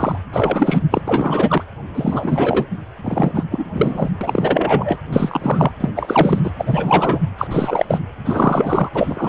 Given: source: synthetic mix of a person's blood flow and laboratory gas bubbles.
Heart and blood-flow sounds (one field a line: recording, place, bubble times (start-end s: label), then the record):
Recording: Doppler ultrasound of blood flow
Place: precordium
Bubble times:
0.00-0.17 s: bubbles
0.33-0.79 s: bubbles
0.91-1.02 s: bubbles
1.07-1.62 s: bubbles
1.94-2.67 s: bubbles
3.04-3.32 s: bubbles
3.34-3.45 s: bubbles
3.50-3.65 s: bubbles
3.72-4.10 s: bubbles
4.21-4.98 s: bubbles
5.12-5.71 s: bubbles
5.80-5.89 s: bubbles
5.95-6.41 s: bubbles
6.43-6.51 s: bubbles
6.58-7.19 s: bubbles
7.38-7.47 s: bubbles
7.50-7.98 s: bubbles
8.24-8.89 s: bubbles
8.95-9.29 s: bubbles
From the record:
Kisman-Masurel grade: 343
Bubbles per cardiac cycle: rolling drumbeat, 9 or more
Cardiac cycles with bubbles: 100%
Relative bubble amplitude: loud (0.450 to 0.775)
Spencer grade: 3 (all of the cardiac periods contain showers or single bubble signals, but not dominating or overriding the cardiac motion signals)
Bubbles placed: anywhere in the cardiac cycle